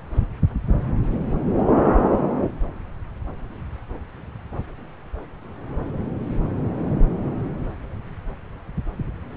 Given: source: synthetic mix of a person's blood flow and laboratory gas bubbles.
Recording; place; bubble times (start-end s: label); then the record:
Doppler ultrasound of blood flow; subclavian vein
no bubbles
From the record:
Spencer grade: 0 (complete lack of bubble signals)